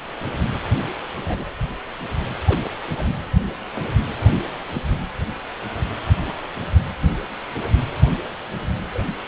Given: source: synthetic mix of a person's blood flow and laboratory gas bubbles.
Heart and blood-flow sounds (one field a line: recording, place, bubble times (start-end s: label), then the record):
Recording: Doppler ultrasound of blood flow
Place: precordium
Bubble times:
1.21-1.49 s: bubbles
2.46-2.65 s: bubbles
2.97-3.08 s: bubbles
4.73-4.82 s: bubbles
6.27-6.32 s: bubbles
8.93-9.04 s: bubbles
From the record:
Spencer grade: 2 (many but less than half of the cardiac periods contain bubble signals, singularly or in groups)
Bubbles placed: anywhere in the cardiac cycle